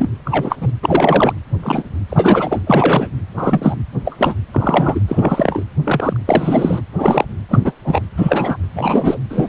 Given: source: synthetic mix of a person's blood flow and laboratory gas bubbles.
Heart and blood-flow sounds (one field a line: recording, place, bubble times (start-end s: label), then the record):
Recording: Doppler ultrasound of blood flow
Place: precordium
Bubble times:
0.00-0.07 s: bubbles
0.24-0.56 s: bubbles
0.60-0.71 s: bubbles
0.82-1.33 s: bubbles
1.62-1.83 s: bubbles
2.09-2.62 s: bubbles
2.67-3.08 s: bubbles
3.36-3.76 s: bubbles
4.05-4.34 s: bubbles
4.52-5.00 s: bubbles
5.08-5.63 s: bubbles
5.83-6.17 s: bubbles
6.25-6.81 s: bubbles
6.94-7.24 s: bubbles
7.48-7.72 s: bubbles
7.84-8.02 s: bubbles
8.16-8.57 s: bubbles
8.73-9.17 s: bubbles
9.29-9.48 s: bubbles
From the record:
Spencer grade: 3 (all of the cardiac periods contain showers or single bubble signals, but not dominating or overriding the cardiac motion signals)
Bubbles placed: anywhere in the cardiac cycle